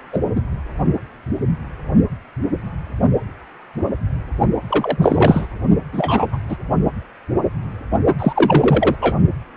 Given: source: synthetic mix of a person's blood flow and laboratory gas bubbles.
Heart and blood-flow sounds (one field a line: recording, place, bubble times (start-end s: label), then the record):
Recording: Doppler ultrasound of blood flow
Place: precordium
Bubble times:
0.12-0.19 s: bubbles
0.35-0.41 s: bubbles
4.67-5.46 s: bubbles
5.92-6.38 s: bubbles
6.48-6.57 s: bubbles
8.18-8.95 s: bubbles
9.01-9.17 s: bubbles
From the record:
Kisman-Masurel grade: 223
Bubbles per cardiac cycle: several, 3 to 8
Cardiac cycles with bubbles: 10 to 50%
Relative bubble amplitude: loud (0.450 to 0.775)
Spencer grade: 2 (many but less than half of the cardiac periods contain bubble signals, singularly or in groups)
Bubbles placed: only in the low amplitude regions of the cardiac cycle